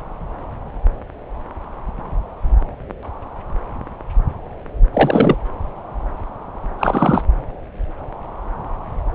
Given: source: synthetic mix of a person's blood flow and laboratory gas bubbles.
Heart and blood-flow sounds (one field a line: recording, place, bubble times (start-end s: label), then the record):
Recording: Doppler ultrasound of blood flow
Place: subclavian vein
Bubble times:
4.93-5.36 s: bubbles
6.79-7.24 s: bubbles
From the record:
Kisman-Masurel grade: 213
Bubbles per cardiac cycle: several, 3 to 8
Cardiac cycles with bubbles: 1 to 10%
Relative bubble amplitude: loud (0.450 to 0.775)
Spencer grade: 1 (occasional bubble signal discernible with the cardiac motion signal, with majority of cardiac periods free of bubbles)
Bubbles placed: anywhere in the cardiac cycle